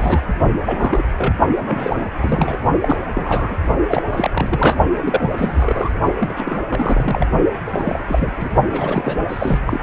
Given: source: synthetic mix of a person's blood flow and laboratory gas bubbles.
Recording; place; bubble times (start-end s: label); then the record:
Doppler ultrasound of blood flow; precordium
0.00-0.21 s: bubbles
0.66-1.03 s: bubbles
1.17-1.33 s: bubbles
1.62-2.06 s: bubbles
2.17-2.59 s: bubbles
2.80-2.97 s: bubbles
3.13-3.58 s: bubbles
3.87-4.03 s: bubbles
4.10-4.77 s: bubbles
5.00-6.00 s: bubbles
6.19-6.63 s: bubbles
6.69-7.26 s: bubbles
7.67-8.01 s: bubbles
8.08-8.33 s: bubbles
8.37-8.48 s: bubbles
8.72-9.16 s: bubbles
9.29-9.60 s: bubbles
9.66-9.80 s: bubbles
From the record:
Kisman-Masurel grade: 342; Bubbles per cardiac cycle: rolling drumbeat, 9 or more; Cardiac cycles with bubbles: 100%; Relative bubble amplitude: moderate (0.250 to 0.450); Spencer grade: 3 (all of the cardiac periods contain showers or single bubble signals, but not dominating or overriding the cardiac motion signals); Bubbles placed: only in the low amplitude regions of the cardiac cycle